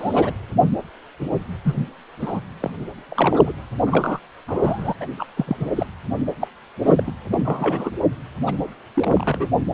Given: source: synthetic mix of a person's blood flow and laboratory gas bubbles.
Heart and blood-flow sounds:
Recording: Doppler ultrasound of blood flow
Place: precordium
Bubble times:
0.00-0.34 s: bubbles
1.64-1.85 s: bubbles
2.19-2.40 s: bubbles
2.60-2.71 s: bubbles
3.08-3.53 s: bubbles
3.86-4.20 s: bubbles
4.48-4.94 s: bubbles
5.00-5.06 s: bubbles
5.18-5.26 s: bubbles
5.37-5.57 s: bubbles
5.59-5.73 s: bubbles
5.75-5.86 s: bubbles
6.41-6.47 s: bubbles
6.81-7.04 s: bubbles
7.06-7.13 s: bubbles
7.29-7.91 s: bubbles
8.47-8.54 s: bubbles
8.95-9.47 s: bubbles
From the record:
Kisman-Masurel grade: 232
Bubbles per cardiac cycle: several, 3 to 8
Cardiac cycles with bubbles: 50 to 99%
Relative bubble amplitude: moderate (0.250 to 0.450)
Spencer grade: 3 (all of the cardiac periods contain showers or single bubble signals, but not dominating or overriding the cardiac motion signals)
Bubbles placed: anywhere in the cardiac cycle

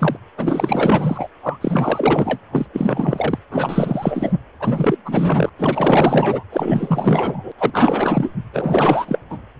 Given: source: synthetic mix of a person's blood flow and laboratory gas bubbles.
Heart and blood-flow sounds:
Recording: Doppler ultrasound of blood flow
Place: precordium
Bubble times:
0.00-0.17 s: bubbles
0.37-1.28 s: bubbles
1.42-1.58 s: bubbles
1.61-2.40 s: bubbles
2.51-2.66 s: bubbles
2.73-3.39 s: bubbles
3.51-4.33 s: bubbles
4.59-4.96 s: bubbles
5.05-5.50 s: bubbles
5.58-6.43 s: bubbles
6.52-7.52 s: bubbles
7.58-8.31 s: bubbles
8.53-9.19 s: bubbles
9.29-9.38 s: bubbles
From the record:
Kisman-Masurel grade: 444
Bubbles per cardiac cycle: continuous sound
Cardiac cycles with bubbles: 100%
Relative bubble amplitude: maximal (0.775 to 0.999)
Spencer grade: 4 (maximum detectable bubble signal sounding continuously throughout systole and diastole of every cardiac period, and overriding the amplitude of the normal cardiac signals)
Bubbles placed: anywhere in the cardiac cycle

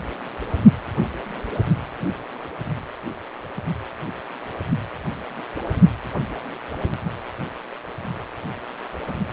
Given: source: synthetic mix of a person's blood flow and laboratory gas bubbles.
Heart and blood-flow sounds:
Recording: Doppler ultrasound of blood flow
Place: precordium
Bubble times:
no bubbles
From the record:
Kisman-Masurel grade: 000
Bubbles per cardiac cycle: 0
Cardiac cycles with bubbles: 0%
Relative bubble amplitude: no bubbles discernible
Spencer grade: 0 (complete lack of bubble signals)

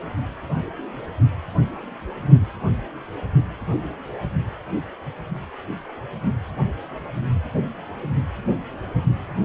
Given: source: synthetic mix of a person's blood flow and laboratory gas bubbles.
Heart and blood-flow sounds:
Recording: Doppler ultrasound of blood flow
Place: precordium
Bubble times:
no bubbles
From the record:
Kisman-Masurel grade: 000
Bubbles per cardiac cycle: 0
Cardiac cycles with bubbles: 0%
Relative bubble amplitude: no bubbles discernible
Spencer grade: 0 (complete lack of bubble signals)

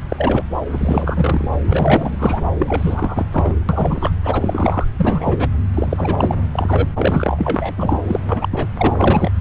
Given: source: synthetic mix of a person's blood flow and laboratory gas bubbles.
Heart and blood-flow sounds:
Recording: Doppler ultrasound of blood flow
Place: subclavian vein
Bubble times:
0.09-0.44 s: bubbles
0.68-1.48 s: bubbles
1.67-2.41 s: bubbles
2.58-3.26 s: bubbles
3.31-3.55 s: bubbles
3.69-4.11 s: bubbles
4.23-4.84 s: bubbles
4.97-5.48 s: bubbles
5.74-6.35 s: bubbles
6.51-6.89 s: bubbles
6.95-8.03 s: bubbles
8.06-8.67 s: bubbles
8.77-9.31 s: bubbles
From the record:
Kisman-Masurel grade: 343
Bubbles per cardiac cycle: rolling drumbeat, 9 or more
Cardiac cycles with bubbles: 100%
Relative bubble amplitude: loud (0.450 to 0.775)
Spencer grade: 3 (all of the cardiac periods contain showers or single bubble signals, but not dominating or overriding the cardiac motion signals)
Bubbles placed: anywhere in the cardiac cycle

